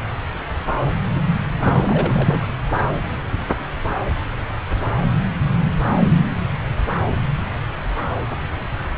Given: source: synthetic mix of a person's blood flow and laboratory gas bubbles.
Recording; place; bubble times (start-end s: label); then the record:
Doppler ultrasound of blood flow; subclavian vein
1.60-2.42 s: bubbles
From the record:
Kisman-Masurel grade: 212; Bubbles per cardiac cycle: several, 3 to 8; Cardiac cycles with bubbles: 1 to 10%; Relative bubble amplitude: moderate (0.250 to 0.450); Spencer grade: 1 (occasional bubble signal discernible with the cardiac motion signal, with majority of cardiac periods free of bubbles); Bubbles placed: anywhere in the cardiac cycle